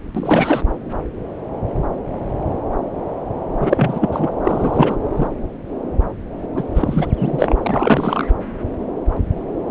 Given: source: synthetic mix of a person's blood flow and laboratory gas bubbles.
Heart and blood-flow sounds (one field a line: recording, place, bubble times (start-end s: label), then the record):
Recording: Doppler ultrasound of blood flow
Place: subclavian vein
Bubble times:
0.15-0.62 s: bubbles
3.60-4.09 s: bubbles
4.12-4.32 s: bubbles
4.43-4.96 s: bubbles
5.17-5.28 s: bubbles
6.54-6.64 s: bubbles
6.75-7.11 s: bubbles
7.18-7.55 s: bubbles
7.62-8.29 s: bubbles
From the record:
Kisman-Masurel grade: 333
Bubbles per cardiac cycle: rolling drumbeat, 9 or more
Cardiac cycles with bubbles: 50 to 99%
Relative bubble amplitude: loud (0.450 to 0.775)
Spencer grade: 3 (all of the cardiac periods contain showers or single bubble signals, but not dominating or overriding the cardiac motion signals)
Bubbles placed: anywhere in the cardiac cycle